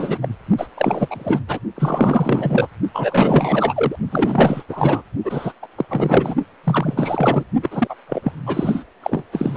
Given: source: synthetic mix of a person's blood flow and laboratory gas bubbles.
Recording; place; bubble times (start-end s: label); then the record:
Doppler ultrasound of blood flow; precordium
0.00-0.18 s: bubbles
0.21-0.28 s: bubbles
0.57-0.67 s: bubbles
0.77-1.40 s: bubbles
1.47-1.59 s: bubbles
1.74-2.67 s: bubbles
2.94-3.96 s: bubbles
4.11-4.62 s: bubbles
4.69-5.03 s: bubbles
5.24-5.52 s: bubbles
5.62-5.67 s: bubbles
5.78-5.85 s: bubbles
5.89-6.35 s: bubbles
6.63-7.44 s: bubbles
7.62-7.95 s: bubbles
8.09-8.32 s: bubbles
8.46-8.84 s: bubbles
9.03-9.23 s: bubbles
9.32-9.57 s: bubbles
From the record:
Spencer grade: 4 (maximum detectable bubble signal sounding continuously throughout systole and diastole of every cardiac period, and overriding the amplitude of the normal cardiac signals); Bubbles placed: only in the low amplitude regions of the cardiac cycle